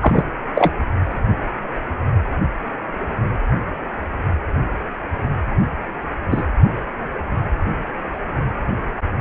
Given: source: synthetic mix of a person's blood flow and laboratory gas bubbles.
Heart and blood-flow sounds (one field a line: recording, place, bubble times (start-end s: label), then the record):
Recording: Doppler ultrasound of blood flow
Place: precordium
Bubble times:
0.01-0.23 s: bubbles
0.55-0.71 s: bubbles
6.30-6.44 s: bubbles
From the record:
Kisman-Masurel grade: 123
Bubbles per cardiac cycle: 1 to 2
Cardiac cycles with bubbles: 10 to 50%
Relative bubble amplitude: loud (0.450 to 0.775)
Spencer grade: 2 (many but less than half of the cardiac periods contain bubble signals, singularly or in groups)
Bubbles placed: only in the low amplitude regions of the cardiac cycle